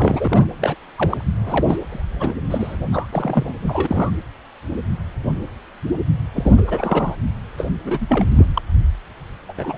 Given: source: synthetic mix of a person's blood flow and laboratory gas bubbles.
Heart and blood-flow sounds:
Doppler ultrasound of blood flow; precordium
0.00-0.47 s: bubbles
0.61-0.75 s: bubbles
0.95-1.25 s: bubbles
1.47-1.77 s: bubbles
1.90-2.33 s: bubbles
2.48-2.77 s: bubbles
2.92-3.07 s: bubbles
3.12-3.54 s: bubbles
3.62-4.10 s: bubbles
6.34-6.62 s: bubbles
6.67-7.16 s: bubbles
7.57-7.65 s: bubbles
7.83-8.29 s: bubbles
8.36-8.46 s: bubbles
8.54-8.62 s: bubbles
9.49-9.53 s: bubbles
9.57-9.78 s: bubbles
From the record:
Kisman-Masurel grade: 232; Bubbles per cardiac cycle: several, 3 to 8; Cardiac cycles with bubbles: 50 to 99%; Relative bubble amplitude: moderate (0.250 to 0.450); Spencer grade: 3 (all of the cardiac periods contain showers or single bubble signals, but not dominating or overriding the cardiac motion signals); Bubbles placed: anywhere in the cardiac cycle

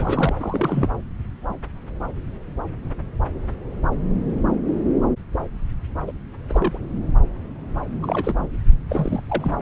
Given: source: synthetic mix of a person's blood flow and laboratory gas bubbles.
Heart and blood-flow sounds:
Doppler ultrasound of blood flow; subclavian vein
0.00-0.32 s: bubbles
0.40-0.88 s: bubbles
6.07-6.12 s: bubbles
6.49-6.78 s: bubbles
8.02-8.47 s: bubbles
8.89-9.21 s: bubbles
9.28-9.58 s: bubbles
From the record:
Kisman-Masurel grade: 222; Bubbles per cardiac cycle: several, 3 to 8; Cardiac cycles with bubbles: 10 to 50%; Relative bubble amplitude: moderate (0.250 to 0.450); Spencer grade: 2 (many but less than half of the cardiac periods contain bubble signals, singularly or in groups); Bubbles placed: anywhere in the cardiac cycle

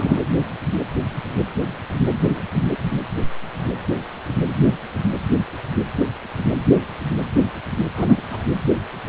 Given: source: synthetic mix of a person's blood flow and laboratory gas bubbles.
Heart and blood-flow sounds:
Doppler ultrasound of blood flow; precordium
0.00-0.23 s: bubbles
7.94-8.21 s: bubbles
8.30-8.45 s: bubbles
From the record:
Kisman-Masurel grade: 211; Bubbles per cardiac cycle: several, 3 to 8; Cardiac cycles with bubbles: 1 to 10%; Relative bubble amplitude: barely perceptible (0.100 to 0.250); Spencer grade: 1 (occasional bubble signal discernible with the cardiac motion signal, with majority of cardiac periods free of bubbles); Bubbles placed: anywhere in the cardiac cycle

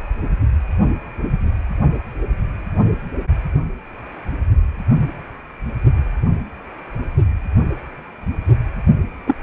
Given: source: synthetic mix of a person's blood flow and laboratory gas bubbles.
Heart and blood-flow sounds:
Doppler ultrasound of blood flow; precordium
9.27-9.36 s: bubbles
From the record:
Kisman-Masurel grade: 113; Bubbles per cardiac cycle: 1 to 2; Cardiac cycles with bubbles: 1 to 10%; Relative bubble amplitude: loud (0.450 to 0.775); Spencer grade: 1 (occasional bubble signal discernible with the cardiac motion signal, with majority of cardiac periods free of bubbles); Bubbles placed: anywhere in the cardiac cycle

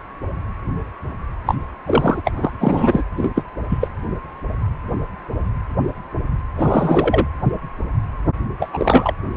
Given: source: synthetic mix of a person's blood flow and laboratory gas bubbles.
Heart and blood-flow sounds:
Doppler ultrasound of blood flow; precordium
1.46-1.54 s: bubbles
1.85-2.22 s: bubbles
2.25-2.31 s: bubbles
2.36-2.51 s: bubbles
2.60-3.04 s: bubbles
3.16-3.42 s: bubbles
3.69-3.88 s: bubbles
6.56-7.26 s: bubbles
8.59-9.13 s: bubbles
From the record:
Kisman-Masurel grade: 223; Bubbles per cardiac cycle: several, 3 to 8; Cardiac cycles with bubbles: 10 to 50%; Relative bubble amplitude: loud (0.450 to 0.775); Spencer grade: 2 (many but less than half of the cardiac periods contain bubble signals, singularly or in groups); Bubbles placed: anywhere in the cardiac cycle

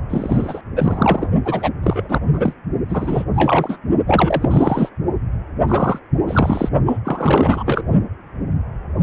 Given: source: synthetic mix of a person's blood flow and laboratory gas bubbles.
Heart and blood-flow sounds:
Doppler ultrasound of blood flow; precordium
0.09-0.62 s: bubbles
0.76-1.28 s: bubbles
1.45-1.70 s: bubbles
1.83-2.19 s: bubbles
2.33-2.54 s: bubbles
2.88-3.25 s: bubbles
3.33-3.78 s: bubbles
4.07-4.90 s: bubbles
5.68-5.99 s: bubbles
6.28-6.69 s: bubbles
6.86-6.97 s: bubbles
7.04-7.63 s: bubbles
7.66-7.82 s: bubbles
From the record:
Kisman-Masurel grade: 333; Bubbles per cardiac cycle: rolling drumbeat, 9 or more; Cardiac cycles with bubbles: 50 to 99%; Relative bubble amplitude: loud (0.450 to 0.775); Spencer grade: 3 (all of the cardiac periods contain showers or single bubble signals, but not dominating or overriding the cardiac motion signals); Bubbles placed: only in the low amplitude regions of the cardiac cycle

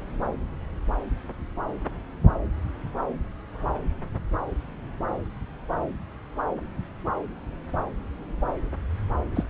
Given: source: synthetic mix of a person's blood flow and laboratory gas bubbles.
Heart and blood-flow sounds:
Doppler ultrasound of blood flow; subclavian vein
9.35-9.44 s: bubbles
From the record:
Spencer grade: 1 (occasional bubble signal discernible with the cardiac motion signal, with majority of cardiac periods free of bubbles); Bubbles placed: anywhere in the cardiac cycle

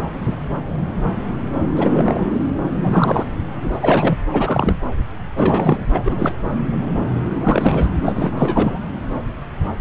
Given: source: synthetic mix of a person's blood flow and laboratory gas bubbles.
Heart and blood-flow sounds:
Doppler ultrasound of blood flow; subclavian vein
1.76-2.26 s: bubbles
2.83-3.26 s: bubbles
3.82-4.16 s: bubbles
4.33-4.75 s: bubbles
5.36-5.83 s: bubbles
5.89-6.33 s: bubbles
7.40-7.86 s: bubbles
8.05-8.79 s: bubbles
From the record:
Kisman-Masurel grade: 333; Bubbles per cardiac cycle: rolling drumbeat, 9 or more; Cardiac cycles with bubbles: 50 to 99%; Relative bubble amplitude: loud (0.450 to 0.775); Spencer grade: 3 (all of the cardiac periods contain showers or single bubble signals, but not dominating or overriding the cardiac motion signals); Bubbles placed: anywhere in the cardiac cycle

